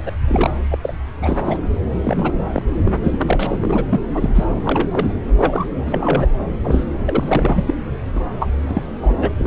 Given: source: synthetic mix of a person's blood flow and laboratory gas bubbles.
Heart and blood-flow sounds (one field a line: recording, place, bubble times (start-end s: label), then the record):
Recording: Doppler ultrasound of blood flow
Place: subclavian vein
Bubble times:
0.06-0.12 s: bubbles
0.27-0.51 s: bubbles
0.71-0.78 s: bubbles
0.83-0.93 s: bubbles
1.21-1.57 s: bubbles
2.04-2.33 s: bubbles
2.52-2.63 s: bubbles
2.85-3.85 s: bubbles
3.89-4.01 s: bubbles
4.14-4.30 s: bubbles
4.34-4.45 s: bubbles
4.50-5.13 s: bubbles
5.38-5.66 s: bubbles
5.86-6.26 s: bubbles
6.62-6.84 s: bubbles
7.05-7.74 s: bubbles
8.15-8.24 s: bubbles
8.39-8.48 s: bubbles
8.67-8.82 s: bubbles
9.01-9.16 s: bubbles
9.19-9.29 s: bubbles
9.37-9.47 s: bubbles
From the record:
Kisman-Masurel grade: 342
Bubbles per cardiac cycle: rolling drumbeat, 9 or more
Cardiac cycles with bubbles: 100%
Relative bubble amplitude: moderate (0.250 to 0.450)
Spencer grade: 3 (all of the cardiac periods contain showers or single bubble signals, but not dominating or overriding the cardiac motion signals)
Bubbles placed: anywhere in the cardiac cycle